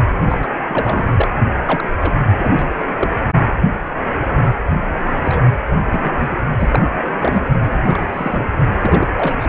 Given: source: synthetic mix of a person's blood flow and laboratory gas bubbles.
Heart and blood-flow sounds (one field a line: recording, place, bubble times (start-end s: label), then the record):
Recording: Doppler ultrasound of blood flow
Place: precordium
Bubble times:
0.29-0.47 s: bubbles
0.68-1.27 s: bubbles
1.65-1.91 s: bubbles
2.00-2.14 s: bubbles
2.37-2.85 s: bubbles
2.98-3.18 s: bubbles
5.24-5.41 s: bubbles
5.92-6.01 s: bubbles
6.04-6.10 s: bubbles
6.17-6.28 s: bubbles
6.59-6.82 s: bubbles
7.19-7.49 s: bubbles
7.71-8.45 s: bubbles
8.81-9.07 s: bubbles
9.17-9.47 s: bubbles
From the record:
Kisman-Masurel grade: 232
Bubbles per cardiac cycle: several, 3 to 8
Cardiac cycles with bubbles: 50 to 99%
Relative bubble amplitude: moderate (0.250 to 0.450)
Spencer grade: 3 (all of the cardiac periods contain showers or single bubble signals, but not dominating or overriding the cardiac motion signals)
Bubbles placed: anywhere in the cardiac cycle